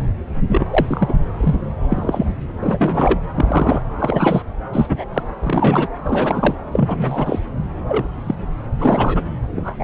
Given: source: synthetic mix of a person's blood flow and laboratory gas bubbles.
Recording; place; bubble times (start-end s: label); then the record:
Doppler ultrasound of blood flow; subclavian vein
0.48-0.66 s: bubbles
0.70-1.13 s: bubbles
1.40-1.56 s: bubbles
1.89-2.26 s: bubbles
2.61-3.19 s: bubbles
3.35-3.82 s: bubbles
3.99-4.42 s: bubbles
4.73-5.04 s: bubbles
5.13-5.23 s: bubbles
5.40-5.87 s: bubbles
6.03-6.56 s: bubbles
6.71-7.39 s: bubbles
7.88-8.07 s: bubbles
8.23-8.34 s: bubbles
8.80-9.24 s: bubbles
9.56-9.76 s: bubbles
9.79-9.84 s: bubbles
From the record:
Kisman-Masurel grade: 243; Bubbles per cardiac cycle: several, 3 to 8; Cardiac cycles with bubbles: 100%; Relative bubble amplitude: loud (0.450 to 0.775); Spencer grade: 3 (all of the cardiac periods contain showers or single bubble signals, but not dominating or overriding the cardiac motion signals); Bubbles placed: anywhere in the cardiac cycle